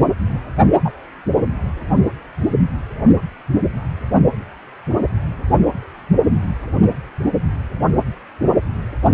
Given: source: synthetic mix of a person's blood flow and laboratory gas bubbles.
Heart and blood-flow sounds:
Doppler ultrasound of blood flow; precordium
0.84-0.92 s: bubbles
From the record:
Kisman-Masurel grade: 113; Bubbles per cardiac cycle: 1 to 2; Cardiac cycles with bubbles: 1 to 10%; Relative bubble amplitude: loud (0.450 to 0.775); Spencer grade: 1 (occasional bubble signal discernible with the cardiac motion signal, with majority of cardiac periods free of bubbles); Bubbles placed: only in the low amplitude regions of the cardiac cycle

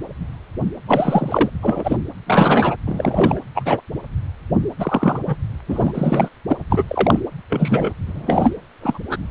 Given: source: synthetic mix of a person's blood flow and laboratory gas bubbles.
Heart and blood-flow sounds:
Doppler ultrasound of blood flow; precordium
0.87-1.50 s: bubbles
1.61-1.97 s: bubbles
2.26-2.76 s: bubbles
2.86-3.41 s: bubbles
3.54-3.80 s: bubbles
4.78-5.19 s: bubbles
5.27-5.36 s: bubbles
5.67-6.29 s: bubbles
6.47-6.57 s: bubbles
6.70-6.84 s: bubbles
6.88-7.20 s: bubbles
7.50-7.92 s: bubbles
8.07-8.54 s: bubbles
8.81-8.99 s: bubbles
9.09-9.18 s: bubbles
From the record:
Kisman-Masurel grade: 233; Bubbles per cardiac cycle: several, 3 to 8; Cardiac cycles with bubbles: 50 to 99%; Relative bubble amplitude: loud (0.450 to 0.775); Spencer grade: 3 (all of the cardiac periods contain showers or single bubble signals, but not dominating or overriding the cardiac motion signals); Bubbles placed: anywhere in the cardiac cycle

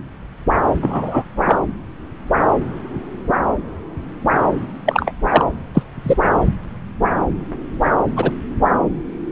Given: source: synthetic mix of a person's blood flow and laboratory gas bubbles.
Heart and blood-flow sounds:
Doppler ultrasound of blood flow; subclavian vein
0.81-1.24 s: bubbles
1.45-1.59 s: bubbles
4.86-5.12 s: bubbles
5.29-5.45 s: bubbles
5.74-5.83 s: bubbles
6.04-6.17 s: bubbles
8.15-8.31 s: bubbles
From the record:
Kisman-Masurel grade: 123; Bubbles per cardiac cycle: 1 to 2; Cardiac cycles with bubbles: 10 to 50%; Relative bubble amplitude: loud (0.450 to 0.775); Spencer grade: 2 (many but less than half of the cardiac periods contain bubble signals, singularly or in groups); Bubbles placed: anywhere in the cardiac cycle

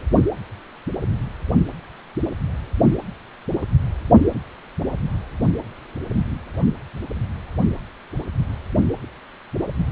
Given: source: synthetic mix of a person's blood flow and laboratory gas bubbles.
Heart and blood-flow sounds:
Doppler ultrasound of blood flow; precordium
no bubbles
From the record:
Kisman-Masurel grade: 000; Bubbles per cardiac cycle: 0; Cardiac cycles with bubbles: 0%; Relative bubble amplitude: no bubbles discernible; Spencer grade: 0 (complete lack of bubble signals)

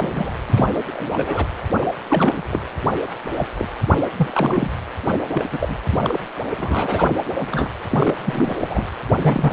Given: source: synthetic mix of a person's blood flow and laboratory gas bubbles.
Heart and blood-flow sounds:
Doppler ultrasound of blood flow; precordium
0.00-0.32 s: bubbles
0.49-1.48 s: bubbles
1.81-1.86 s: bubbles
2.08-2.43 s: bubbles
2.51-2.61 s: bubbles
3.37-3.47 s: bubbles
3.56-3.68 s: bubbles
4.16-4.30 s: bubbles
4.33-4.70 s: bubbles
5.32-5.46 s: bubbles
5.51-5.78 s: bubbles
5.91-5.98 s: bubbles
6.02-6.19 s: bubbles
6.57-7.09 s: bubbles
7.39-7.68 s: bubbles
7.91-8.13 s: bubbles
8.25-8.56 s: bubbles
8.60-8.86 s: bubbles
9.21-9.53 s: bubbles
From the record:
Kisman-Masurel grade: 243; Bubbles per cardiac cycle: several, 3 to 8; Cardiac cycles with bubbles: 100%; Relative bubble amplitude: loud (0.450 to 0.775); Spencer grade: 3 (all of the cardiac periods contain showers or single bubble signals, but not dominating or overriding the cardiac motion signals); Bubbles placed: anywhere in the cardiac cycle

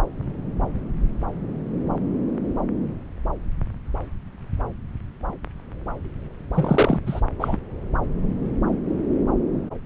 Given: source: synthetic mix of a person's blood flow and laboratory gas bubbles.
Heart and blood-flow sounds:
Doppler ultrasound of blood flow; subclavian vein
6.54-7.00 s: bubbles
7.06-7.21 s: bubbles
7.39-7.57 s: bubbles
From the record:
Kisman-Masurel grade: 212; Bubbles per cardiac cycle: several, 3 to 8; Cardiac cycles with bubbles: 1 to 10%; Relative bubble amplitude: moderate (0.250 to 0.450); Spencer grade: 1 (occasional bubble signal discernible with the cardiac motion signal, with majority of cardiac periods free of bubbles); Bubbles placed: anywhere in the cardiac cycle

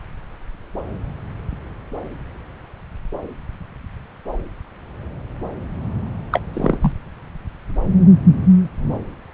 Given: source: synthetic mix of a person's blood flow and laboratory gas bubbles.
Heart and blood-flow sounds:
Doppler ultrasound of blood flow; subclavian vein
6.31-6.40 s: bubbles
6.53-6.78 s: bubbles
6.80-6.92 s: bubbles
From the record:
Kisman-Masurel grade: 212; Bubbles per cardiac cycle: several, 3 to 8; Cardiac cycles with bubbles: 1 to 10%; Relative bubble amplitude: moderate (0.250 to 0.450); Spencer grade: 1 (occasional bubble signal discernible with the cardiac motion signal, with majority of cardiac periods free of bubbles); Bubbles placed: anywhere in the cardiac cycle

